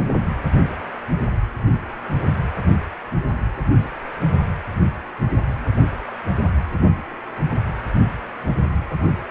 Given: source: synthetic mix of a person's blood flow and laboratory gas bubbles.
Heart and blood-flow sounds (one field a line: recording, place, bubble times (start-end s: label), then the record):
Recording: Doppler ultrasound of blood flow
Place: precordium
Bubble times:
no bubbles
From the record:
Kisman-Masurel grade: 000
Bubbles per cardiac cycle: 0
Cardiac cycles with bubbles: 0%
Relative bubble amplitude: no bubbles discernible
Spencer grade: 0 (complete lack of bubble signals)